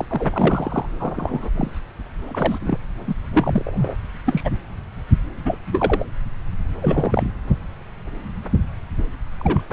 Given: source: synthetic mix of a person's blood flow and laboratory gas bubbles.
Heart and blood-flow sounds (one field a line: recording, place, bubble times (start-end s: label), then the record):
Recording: Doppler ultrasound of blood flow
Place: subclavian vein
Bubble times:
0.00-0.05 s: bubbles
0.10-0.85 s: bubbles
0.99-1.49 s: bubbles
1.56-1.70 s: bubbles
2.27-2.58 s: bubbles
2.62-2.77 s: bubbles
3.08-3.14 s: bubbles
3.33-3.94 s: bubbles
4.26-4.50 s: bubbles
5.45-5.58 s: bubbles
5.71-6.04 s: bubbles
6.82-7.23 s: bubbles
9.39-9.61 s: bubbles
From the record:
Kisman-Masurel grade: 232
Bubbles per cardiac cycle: several, 3 to 8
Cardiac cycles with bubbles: 50 to 99%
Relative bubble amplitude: moderate (0.250 to 0.450)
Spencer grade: 3 (all of the cardiac periods contain showers or single bubble signals, but not dominating or overriding the cardiac motion signals)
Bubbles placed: anywhere in the cardiac cycle